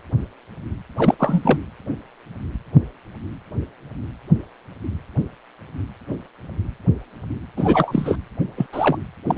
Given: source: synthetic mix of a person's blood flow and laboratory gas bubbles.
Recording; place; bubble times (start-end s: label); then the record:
Doppler ultrasound of blood flow; precordium
0.97-1.15 s: bubbles
1.19-1.58 s: bubbles
7.56-8.17 s: bubbles
8.57-8.66 s: bubbles
8.72-8.98 s: bubbles
9.26-9.38 s: bubbles
From the record:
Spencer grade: 2 (many but less than half of the cardiac periods contain bubble signals, singularly or in groups); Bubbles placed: anywhere in the cardiac cycle